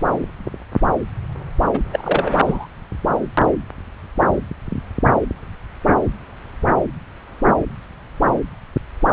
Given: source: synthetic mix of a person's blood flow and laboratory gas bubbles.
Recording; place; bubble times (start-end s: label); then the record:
Doppler ultrasound of blood flow; subclavian vein
1.73-1.79 s: bubbles
1.93-2.34 s: bubbles
2.44-2.67 s: bubbles
From the record:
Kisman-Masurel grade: 213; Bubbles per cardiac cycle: several, 3 to 8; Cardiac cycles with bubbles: 1 to 10%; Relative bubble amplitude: loud (0.450 to 0.775); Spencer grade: 1 (occasional bubble signal discernible with the cardiac motion signal, with majority of cardiac periods free of bubbles); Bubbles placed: anywhere in the cardiac cycle